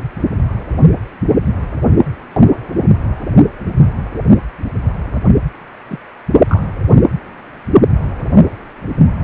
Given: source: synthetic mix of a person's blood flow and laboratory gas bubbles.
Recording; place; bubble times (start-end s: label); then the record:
Doppler ultrasound of blood flow; precordium
5.88-5.99 s: bubbles
6.48-6.67 s: bubbles
From the record:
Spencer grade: 1 (occasional bubble signal discernible with the cardiac motion signal, with majority of cardiac periods free of bubbles); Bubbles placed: anywhere in the cardiac cycle